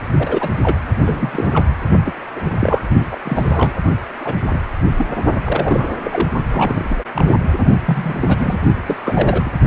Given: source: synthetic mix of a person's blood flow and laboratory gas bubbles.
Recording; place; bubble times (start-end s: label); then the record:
Doppler ultrasound of blood flow; precordium
0.18-0.50 s: bubbles
0.62-0.77 s: bubbles
1.04-1.70 s: bubbles
2.05-2.15 s: bubbles
2.35-2.81 s: bubbles
3.00-3.05 s: bubbles
3.10-3.17 s: bubbles
3.25-3.73 s: bubbles
4.20-4.34 s: bubbles
4.50-4.61 s: bubbles
4.97-5.07 s: bubbles
5.44-5.94 s: bubbles
6.04-6.28 s: bubbles
6.51-7.04 s: bubbles
7.14-7.24 s: bubbles
7.86-8.58 s: bubbles
8.87-8.96 s: bubbles
9.04-9.51 s: bubbles
From the record:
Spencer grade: 3 (all of the cardiac periods contain showers or single bubble signals, but not dominating or overriding the cardiac motion signals); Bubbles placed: only in the low amplitude regions of the cardiac cycle